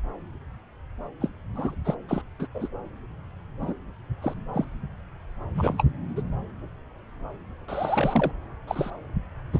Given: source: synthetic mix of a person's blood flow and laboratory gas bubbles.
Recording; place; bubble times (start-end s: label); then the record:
Doppler ultrasound of blood flow; subclavian vein
1.21-1.29 s: bubbles
1.53-1.75 s: bubbles
1.85-1.95 s: bubbles
2.08-2.22 s: bubbles
2.39-2.48 s: bubbles
2.54-2.69 s: bubbles
3.62-3.74 s: bubbles
4.21-4.34 s: bubbles
4.53-4.65 s: bubbles
5.54-5.84 s: bubbles
6.16-6.22 s: bubbles
7.68-8.31 s: bubbles
8.67-8.90 s: bubbles
9.52-9.59 s: bubbles
From the record:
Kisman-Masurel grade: 232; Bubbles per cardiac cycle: several, 3 to 8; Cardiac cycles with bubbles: 50 to 99%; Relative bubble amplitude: moderate (0.250 to 0.450); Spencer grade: 3 (all of the cardiac periods contain showers or single bubble signals, but not dominating or overriding the cardiac motion signals); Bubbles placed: anywhere in the cardiac cycle